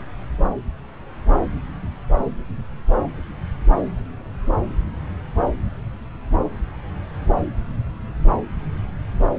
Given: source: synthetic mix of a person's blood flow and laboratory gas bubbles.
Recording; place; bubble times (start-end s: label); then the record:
Doppler ultrasound of blood flow; subclavian vein
no bubbles
From the record:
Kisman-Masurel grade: 000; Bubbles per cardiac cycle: 0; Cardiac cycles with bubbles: 0%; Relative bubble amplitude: no bubbles discernible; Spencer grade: 0 (complete lack of bubble signals)